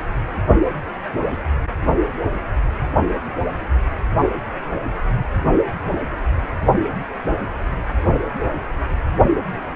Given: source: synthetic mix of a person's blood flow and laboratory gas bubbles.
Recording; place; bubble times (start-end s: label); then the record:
Doppler ultrasound of blood flow; precordium
no bubbles
From the record:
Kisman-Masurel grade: 000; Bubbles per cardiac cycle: 0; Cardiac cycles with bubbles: 0%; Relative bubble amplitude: no bubbles discernible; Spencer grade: 0 (complete lack of bubble signals)